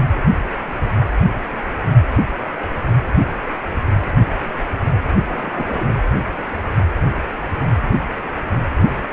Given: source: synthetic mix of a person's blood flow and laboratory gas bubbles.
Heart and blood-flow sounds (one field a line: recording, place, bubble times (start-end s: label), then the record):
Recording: Doppler ultrasound of blood flow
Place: precordium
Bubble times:
5.25-5.86 s: bubbles
From the record:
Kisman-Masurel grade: 111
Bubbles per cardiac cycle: 1 to 2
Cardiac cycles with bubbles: 1 to 10%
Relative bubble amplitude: barely perceptible (0.100 to 0.250)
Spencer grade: 1 (occasional bubble signal discernible with the cardiac motion signal, with majority of cardiac periods free of bubbles)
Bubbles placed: anywhere in the cardiac cycle